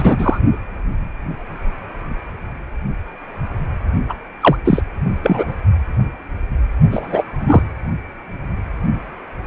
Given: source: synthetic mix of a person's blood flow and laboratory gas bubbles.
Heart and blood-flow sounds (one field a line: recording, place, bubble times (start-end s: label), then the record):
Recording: Doppler ultrasound of blood flow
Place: precordium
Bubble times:
0.00-0.39 s: bubbles
4.08-4.14 s: bubbles
4.41-4.57 s: bubbles
4.65-4.82 s: bubbles
5.23-5.53 s: bubbles
6.91-7.23 s: bubbles
7.40-7.63 s: bubbles
From the record:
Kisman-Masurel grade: 223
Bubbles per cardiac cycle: several, 3 to 8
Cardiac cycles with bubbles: 10 to 50%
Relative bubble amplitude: loud (0.450 to 0.775)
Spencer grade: 2 (many but less than half of the cardiac periods contain bubble signals, singularly or in groups)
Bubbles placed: only in the low amplitude regions of the cardiac cycle